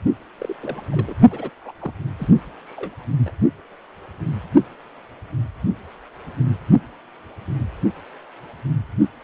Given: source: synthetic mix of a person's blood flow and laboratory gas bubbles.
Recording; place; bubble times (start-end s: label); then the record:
Doppler ultrasound of blood flow; precordium
0.38-0.56 s: bubbles
0.61-0.83 s: bubbles
0.91-1.16 s: bubbles
1.30-1.50 s: bubbles
1.61-1.72 s: bubbles
1.79-1.93 s: bubbles
2.17-2.28 s: bubbles
2.66-3.06 s: bubbles
3.25-3.31 s: bubbles
From the record:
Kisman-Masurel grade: 221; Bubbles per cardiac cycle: several, 3 to 8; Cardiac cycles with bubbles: 10 to 50%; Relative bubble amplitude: barely perceptible (0.100 to 0.250); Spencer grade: 2 (many but less than half of the cardiac periods contain bubble signals, singularly or in groups); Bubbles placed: only in the low amplitude regions of the cardiac cycle